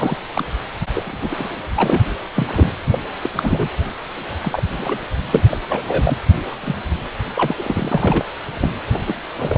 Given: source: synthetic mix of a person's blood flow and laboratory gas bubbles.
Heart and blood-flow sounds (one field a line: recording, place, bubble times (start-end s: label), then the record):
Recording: Doppler ultrasound of blood flow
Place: precordium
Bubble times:
0.00-0.16 s: bubbles
0.31-0.44 s: bubbles
0.94-1.55 s: bubbles
1.76-2.04 s: bubbles
2.35-2.74 s: bubbles
2.91-2.99 s: bubbles
3.22-3.29 s: bubbles
3.35-3.69 s: bubbles
4.43-4.63 s: bubbles
4.72-4.98 s: bubbles
5.31-5.44 s: bubbles
5.50-5.58 s: bubbles
5.68-5.84 s: bubbles
5.88-6.18 s: bubbles
6.51-6.55 s: bubbles
6.60-6.75 s: bubbles
7.35-7.55 s: bubbles
7.57-8.25 s: bubbles
8.60-8.71 s: bubbles
8.86-9.14 s: bubbles
9.38-9.58 s: bubbles
From the record:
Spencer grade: 3 (all of the cardiac periods contain showers or single bubble signals, but not dominating or overriding the cardiac motion signals)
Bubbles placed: anywhere in the cardiac cycle